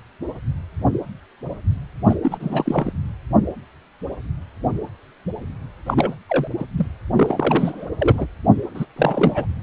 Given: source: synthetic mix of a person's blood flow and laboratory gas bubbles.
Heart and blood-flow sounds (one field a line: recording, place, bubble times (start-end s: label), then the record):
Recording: Doppler ultrasound of blood flow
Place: precordium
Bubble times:
2.06-2.15 s: bubbles
2.22-2.92 s: bubbles
5.86-6.15 s: bubbles
6.28-6.48 s: bubbles
6.59-6.64 s: bubbles
6.77-6.89 s: bubbles
7.16-7.86 s: bubbles
8.00-8.26 s: bubbles
8.74-8.85 s: bubbles
8.96-9.46 s: bubbles
From the record:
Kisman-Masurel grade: 332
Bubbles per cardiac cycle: rolling drumbeat, 9 or more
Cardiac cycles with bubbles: 50 to 99%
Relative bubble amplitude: moderate (0.250 to 0.450)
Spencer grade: 3 (all of the cardiac periods contain showers or single bubble signals, but not dominating or overriding the cardiac motion signals)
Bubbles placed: anywhere in the cardiac cycle